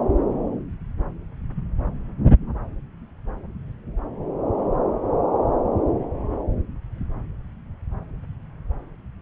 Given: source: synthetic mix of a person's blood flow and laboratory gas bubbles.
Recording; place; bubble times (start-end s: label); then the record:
Doppler ultrasound of blood flow; subclavian vein
no bubbles
From the record:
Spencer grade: 0 (complete lack of bubble signals)